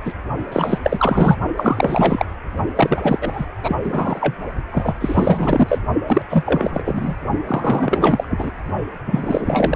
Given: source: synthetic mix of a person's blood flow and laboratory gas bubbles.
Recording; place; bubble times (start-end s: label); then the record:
Doppler ultrasound of blood flow; precordium
0.05-0.13 s: bubbles
0.52-1.36 s: bubbles
1.56-2.25 s: bubbles
2.76-3.46 s: bubbles
3.63-3.76 s: bubbles
3.83-4.35 s: bubbles
4.71-4.95 s: bubbles
5.00-5.79 s: bubbles
6.08-6.22 s: bubbles
6.29-7.14 s: bubbles
7.47-8.52 s: bubbles
9.06-9.76 s: bubbles
From the record:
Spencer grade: 4 (maximum detectable bubble signal sounding continuously throughout systole and diastole of every cardiac period, and overriding the amplitude of the normal cardiac signals); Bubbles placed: only in the low amplitude regions of the cardiac cycle